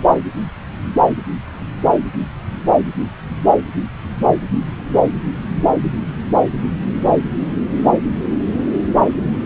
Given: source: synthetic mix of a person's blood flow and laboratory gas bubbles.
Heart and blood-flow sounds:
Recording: Doppler ultrasound of blood flow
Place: subclavian vein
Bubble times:
no bubbles
From the record:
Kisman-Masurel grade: 000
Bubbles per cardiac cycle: 0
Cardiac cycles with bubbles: 0%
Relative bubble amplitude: no bubbles discernible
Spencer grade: 0 (complete lack of bubble signals)

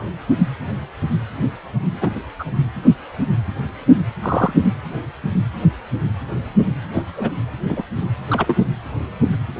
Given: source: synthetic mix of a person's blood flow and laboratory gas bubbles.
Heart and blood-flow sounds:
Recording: Doppler ultrasound of blood flow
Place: precordium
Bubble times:
2.00-2.13 s: bubbles
2.38-2.44 s: bubbles
4.22-4.53 s: bubbles
6.93-7.04 s: bubbles
7.17-7.29 s: bubbles
7.68-7.83 s: bubbles
8.29-8.57 s: bubbles
From the record:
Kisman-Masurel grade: 122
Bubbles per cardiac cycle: 1 to 2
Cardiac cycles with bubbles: 10 to 50%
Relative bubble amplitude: moderate (0.250 to 0.450)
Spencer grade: 2 (many but less than half of the cardiac periods contain bubble signals, singularly or in groups)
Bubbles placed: anywhere in the cardiac cycle

